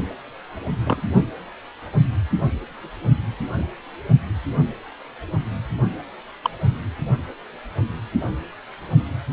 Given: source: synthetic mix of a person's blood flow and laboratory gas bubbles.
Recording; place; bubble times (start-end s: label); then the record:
Doppler ultrasound of blood flow; precordium
0.84-1.02 s: bubbles
6.44-6.50 s: bubbles
From the record:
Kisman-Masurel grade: 122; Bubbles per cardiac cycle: 1 to 2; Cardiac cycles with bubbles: 10 to 50%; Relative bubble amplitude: moderate (0.250 to 0.450); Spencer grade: 2 (many but less than half of the cardiac periods contain bubble signals, singularly or in groups); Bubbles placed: only in the low amplitude regions of the cardiac cycle